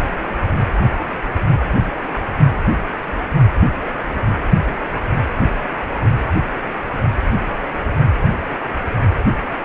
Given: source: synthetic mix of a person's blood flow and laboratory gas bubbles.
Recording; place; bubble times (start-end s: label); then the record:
Doppler ultrasound of blood flow; precordium
no bubbles
From the record:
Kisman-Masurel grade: 000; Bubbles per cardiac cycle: 0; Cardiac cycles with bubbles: 0%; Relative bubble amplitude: no bubbles discernible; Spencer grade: 0 (complete lack of bubble signals)